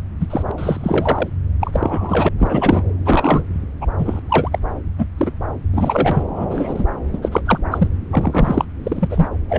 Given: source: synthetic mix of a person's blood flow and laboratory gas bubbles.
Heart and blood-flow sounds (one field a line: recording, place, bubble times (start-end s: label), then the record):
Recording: Doppler ultrasound of blood flow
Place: subclavian vein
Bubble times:
0.20-0.27 s: bubbles
0.30-0.43 s: bubbles
0.48-0.52 s: bubbles
0.57-1.29 s: bubbles
1.60-2.29 s: bubbles
2.39-2.83 s: bubbles
3.05-3.44 s: bubbles
3.81-3.86 s: bubbles
3.98-4.19 s: bubbles
4.28-4.49 s: bubbles
4.52-4.58 s: bubbles
4.97-5.06 s: bubbles
5.17-5.31 s: bubbles
5.72-6.23 s: bubbles
6.35-6.83 s: bubbles
7.12-7.18 s: bubbles
7.22-7.41 s: bubbles
7.46-7.58 s: bubbles
7.71-7.88 s: bubbles
8.11-8.65 s: bubbles
8.83-9.28 s: bubbles
9.49-9.59 s: bubbles
From the record:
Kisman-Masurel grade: 243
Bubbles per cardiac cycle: several, 3 to 8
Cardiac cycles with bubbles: 100%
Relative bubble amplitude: loud (0.450 to 0.775)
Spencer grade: 3 (all of the cardiac periods contain showers or single bubble signals, but not dominating or overriding the cardiac motion signals)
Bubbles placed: anywhere in the cardiac cycle